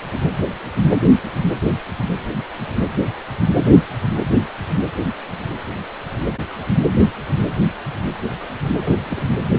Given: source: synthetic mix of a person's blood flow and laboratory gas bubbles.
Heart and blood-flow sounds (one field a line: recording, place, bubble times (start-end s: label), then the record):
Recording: Doppler ultrasound of blood flow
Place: precordium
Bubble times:
8.79-9.26 s: bubbles
From the record:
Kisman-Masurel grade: 211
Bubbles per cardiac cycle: several, 3 to 8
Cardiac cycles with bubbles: 1 to 10%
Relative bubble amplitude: barely perceptible (0.100 to 0.250)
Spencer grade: 1 (occasional bubble signal discernible with the cardiac motion signal, with majority of cardiac periods free of bubbles)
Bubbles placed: anywhere in the cardiac cycle